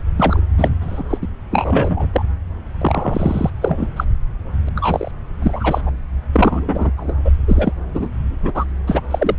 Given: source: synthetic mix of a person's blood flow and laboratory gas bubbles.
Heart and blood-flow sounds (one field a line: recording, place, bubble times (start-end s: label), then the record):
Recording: Doppler ultrasound of blood flow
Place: subclavian vein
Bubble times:
0.17-0.41 s: bubbles
0.58-0.69 s: bubbles
0.81-1.04 s: bubbles
1.10-1.17 s: bubbles
1.21-1.28 s: bubbles
1.50-2.06 s: bubbles
2.12-2.25 s: bubbles
2.81-3.50 s: bubbles
3.61-3.86 s: bubbles
3.96-4.04 s: bubbles
4.67-4.69 s: bubbles
4.75-5.11 s: bubbles
5.42-5.81 s: bubbles
5.86-5.90 s: bubbles
6.33-6.91 s: bubbles
6.97-7.14 s: bubbles
7.24-7.32 s: bubbles
7.47-7.72 s: bubbles
7.94-8.09 s: bubbles
8.43-8.64 s: bubbles
8.87-9.01 s: bubbles
9.11-9.36 s: bubbles
From the record:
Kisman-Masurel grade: 243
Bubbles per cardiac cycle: several, 3 to 8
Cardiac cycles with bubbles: 100%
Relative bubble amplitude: loud (0.450 to 0.775)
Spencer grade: 3 (all of the cardiac periods contain showers or single bubble signals, but not dominating or overriding the cardiac motion signals)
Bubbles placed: anywhere in the cardiac cycle